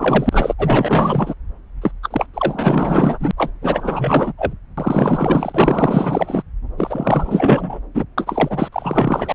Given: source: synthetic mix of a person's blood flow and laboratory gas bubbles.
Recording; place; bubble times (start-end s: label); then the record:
Doppler ultrasound of blood flow; subclavian vein
0.00-0.54 s: bubbles
0.58-1.34 s: bubbles
1.82-1.91 s: bubbles
2.02-2.26 s: bubbles
2.33-3.31 s: bubbles
3.36-3.52 s: bubbles
3.61-4.33 s: bubbles
4.38-4.53 s: bubbles
4.77-6.42 s: bubbles
6.77-7.80 s: bubbles
7.94-8.04 s: bubbles
8.18-8.69 s: bubbles
8.72-9.33 s: bubbles
From the record:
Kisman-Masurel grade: 444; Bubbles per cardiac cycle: continuous sound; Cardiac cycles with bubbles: 100%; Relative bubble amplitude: maximal (0.775 to 0.999); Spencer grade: 4 (maximum detectable bubble signal sounding continuously throughout systole and diastole of every cardiac period, and overriding the amplitude of the normal cardiac signals); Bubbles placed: anywhere in the cardiac cycle